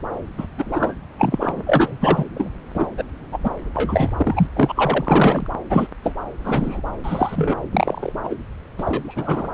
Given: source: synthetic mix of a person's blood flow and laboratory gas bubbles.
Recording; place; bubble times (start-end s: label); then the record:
Doppler ultrasound of blood flow; subclavian vein
0.38-0.46 s: bubbles
0.58-0.94 s: bubbles
1.18-1.63 s: bubbles
1.66-1.98 s: bubbles
2.00-2.24 s: bubbles
2.34-2.50 s: bubbles
2.74-2.87 s: bubbles
2.98-3.03 s: bubbles
3.31-3.38 s: bubbles
3.44-3.50 s: bubbles
3.75-4.10 s: bubbles
4.17-4.47 s: bubbles
4.56-5.47 s: bubbles
5.70-5.87 s: bubbles
6.03-6.15 s: bubbles
6.44-6.81 s: bubbles
7.04-7.56 s: bubbles
7.71-8.12 s: bubbles
8.24-8.36 s: bubbles
8.78-9.47 s: bubbles
From the record:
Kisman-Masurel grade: 242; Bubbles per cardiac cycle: several, 3 to 8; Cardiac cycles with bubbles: 100%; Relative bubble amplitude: moderate (0.250 to 0.450); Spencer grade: 3 (all of the cardiac periods contain showers or single bubble signals, but not dominating or overriding the cardiac motion signals); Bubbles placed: anywhere in the cardiac cycle